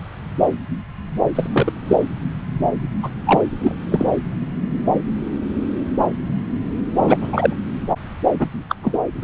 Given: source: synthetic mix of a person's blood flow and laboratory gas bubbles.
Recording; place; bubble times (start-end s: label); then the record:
Doppler ultrasound of blood flow; subclavian vein
1.35-1.47 s: bubbles
1.52-1.73 s: bubbles
1.87-1.97 s: bubbles
3.03-3.10 s: bubbles
3.26-3.42 s: bubbles
3.60-3.75 s: bubbles
3.91-4.06 s: bubbles
6.98-7.17 s: bubbles
7.21-7.54 s: bubbles
8.38-8.47 s: bubbles
8.68-8.75 s: bubbles
8.82-8.98 s: bubbles
From the record:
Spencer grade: 2 (many but less than half of the cardiac periods contain bubble signals, singularly or in groups); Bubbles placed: anywhere in the cardiac cycle